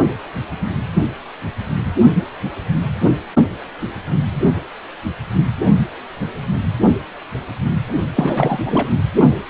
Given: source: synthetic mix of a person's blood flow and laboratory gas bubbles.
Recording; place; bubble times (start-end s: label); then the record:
Doppler ultrasound of blood flow; precordium
8.16-8.59 s: bubbles
8.64-8.89 s: bubbles
From the record:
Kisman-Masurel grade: 223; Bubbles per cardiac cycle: several, 3 to 8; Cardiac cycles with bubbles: 10 to 50%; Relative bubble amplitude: loud (0.450 to 0.775); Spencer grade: 2 (many but less than half of the cardiac periods contain bubble signals, singularly or in groups); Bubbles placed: only in the low amplitude regions of the cardiac cycle